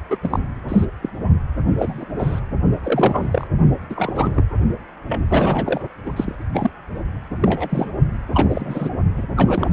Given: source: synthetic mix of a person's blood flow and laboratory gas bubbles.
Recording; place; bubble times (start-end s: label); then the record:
Doppler ultrasound of blood flow; precordium
0.10-0.17 s: bubbles
0.22-0.40 s: bubbles
0.68-0.85 s: bubbles
1.02-1.10 s: bubbles
1.75-2.06 s: bubbles
2.19-2.41 s: bubbles
2.83-3.27 s: bubbles
3.31-3.47 s: bubbles
3.89-4.42 s: bubbles
5.08-5.19 s: bubbles
5.28-5.81 s: bubbles
6.06-6.12 s: bubbles
6.16-6.37 s: bubbles
6.54-6.71 s: bubbles
7.41-7.90 s: bubbles
8.33-8.89 s: bubbles
9.16-9.26 s: bubbles
9.36-9.73 s: bubbles
From the record:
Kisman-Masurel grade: 243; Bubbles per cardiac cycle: several, 3 to 8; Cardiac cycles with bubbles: 100%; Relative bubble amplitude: loud (0.450 to 0.775); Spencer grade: 3 (all of the cardiac periods contain showers or single bubble signals, but not dominating or overriding the cardiac motion signals); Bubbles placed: only in the low amplitude regions of the cardiac cycle